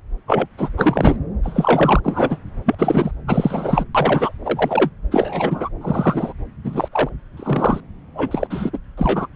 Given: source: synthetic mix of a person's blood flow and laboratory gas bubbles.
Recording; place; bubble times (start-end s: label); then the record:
Doppler ultrasound of blood flow; subclavian vein
0.27-0.46 s: bubbles
0.57-0.69 s: bubbles
0.77-1.16 s: bubbles
1.43-2.00 s: bubbles
2.03-2.38 s: bubbles
2.65-2.75 s: bubbles
2.78-3.11 s: bubbles
3.27-3.84 s: bubbles
3.95-4.31 s: bubbles
4.44-4.91 s: bubbles
5.11-5.69 s: bubbles
5.81-6.33 s: bubbles
6.63-6.88 s: bubbles
6.92-7.09 s: bubbles
7.37-7.80 s: bubbles
8.14-8.71 s: bubbles
8.73-8.79 s: bubbles
8.97-9.27 s: bubbles
From the record:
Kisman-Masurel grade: 243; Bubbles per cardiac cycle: several, 3 to 8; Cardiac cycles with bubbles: 100%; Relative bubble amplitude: loud (0.450 to 0.775); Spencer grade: 3 (all of the cardiac periods contain showers or single bubble signals, but not dominating or overriding the cardiac motion signals); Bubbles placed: anywhere in the cardiac cycle